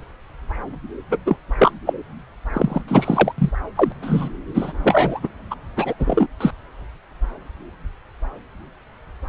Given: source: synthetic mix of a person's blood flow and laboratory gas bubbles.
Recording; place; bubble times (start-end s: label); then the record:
Doppler ultrasound of blood flow; subclavian vein
1.10-1.19 s: bubbles
1.25-1.36 s: bubbles
1.58-1.72 s: bubbles
1.86-1.94 s: bubbles
2.53-2.81 s: bubbles
2.88-3.32 s: bubbles
3.38-3.50 s: bubbles
3.76-3.93 s: bubbles
4.02-4.29 s: bubbles
4.54-4.72 s: bubbles
4.84-5.20 s: bubbles
5.23-5.28 s: bubbles
5.51-5.55 s: bubbles
5.76-5.95 s: bubbles
5.99-6.27 s: bubbles
6.40-6.51 s: bubbles
From the record:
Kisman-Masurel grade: 223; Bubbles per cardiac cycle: several, 3 to 8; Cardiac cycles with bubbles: 10 to 50%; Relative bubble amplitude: loud (0.450 to 0.775); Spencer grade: 2 (many but less than half of the cardiac periods contain bubble signals, singularly or in groups); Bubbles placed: anywhere in the cardiac cycle